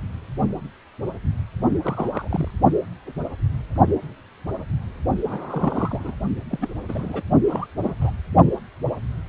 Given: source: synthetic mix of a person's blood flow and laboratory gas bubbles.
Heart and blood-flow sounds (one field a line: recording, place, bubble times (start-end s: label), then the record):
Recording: Doppler ultrasound of blood flow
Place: precordium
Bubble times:
1.70-1.77 s: bubbles
1.83-2.51 s: bubbles
5.25-6.14 s: bubbles
6.49-6.70 s: bubbles
6.88-7.22 s: bubbles
7.47-7.67 s: bubbles
7.81-7.95 s: bubbles
8.01-8.11 s: bubbles
From the record:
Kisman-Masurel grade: 221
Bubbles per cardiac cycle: several, 3 to 8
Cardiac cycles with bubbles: 10 to 50%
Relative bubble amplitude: barely perceptible (0.100 to 0.250)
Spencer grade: 2 (many but less than half of the cardiac periods contain bubble signals, singularly or in groups)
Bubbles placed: only in the low amplitude regions of the cardiac cycle